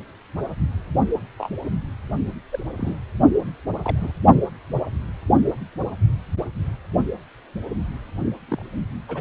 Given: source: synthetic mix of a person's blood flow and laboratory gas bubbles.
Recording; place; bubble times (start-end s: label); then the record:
Doppler ultrasound of blood flow; precordium
1.38-1.48 s: bubbles
2.52-2.59 s: bubbles
2.77-2.96 s: bubbles
3.83-4.12 s: bubbles
8.48-8.64 s: bubbles
9.09-9.21 s: bubbles
From the record:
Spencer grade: 2 (many but less than half of the cardiac periods contain bubble signals, singularly or in groups); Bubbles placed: only in the low amplitude regions of the cardiac cycle